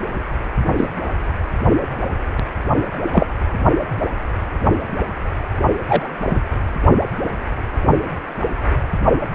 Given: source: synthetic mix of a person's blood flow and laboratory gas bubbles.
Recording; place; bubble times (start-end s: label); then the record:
Doppler ultrasound of blood flow; precordium
0.77-0.87 s: bubbles
3.13-3.26 s: bubbles
5.87-6.09 s: bubbles
6.26-6.39 s: bubbles
From the record:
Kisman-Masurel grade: 123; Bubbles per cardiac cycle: 1 to 2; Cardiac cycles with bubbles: 10 to 50%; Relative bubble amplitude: loud (0.450 to 0.775); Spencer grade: 2 (many but less than half of the cardiac periods contain bubble signals, singularly or in groups); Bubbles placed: only in the low amplitude regions of the cardiac cycle